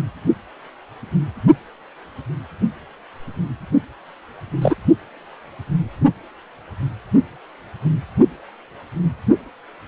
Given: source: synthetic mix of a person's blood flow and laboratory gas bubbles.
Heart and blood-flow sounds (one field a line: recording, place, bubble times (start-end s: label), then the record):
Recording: Doppler ultrasound of blood flow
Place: precordium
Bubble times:
4.62-4.75 s: bubbles
From the record:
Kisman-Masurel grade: 113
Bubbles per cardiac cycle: 1 to 2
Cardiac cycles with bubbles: 1 to 10%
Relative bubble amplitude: loud (0.450 to 0.775)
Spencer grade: 1 (occasional bubble signal discernible with the cardiac motion signal, with majority of cardiac periods free of bubbles)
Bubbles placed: only in the low amplitude regions of the cardiac cycle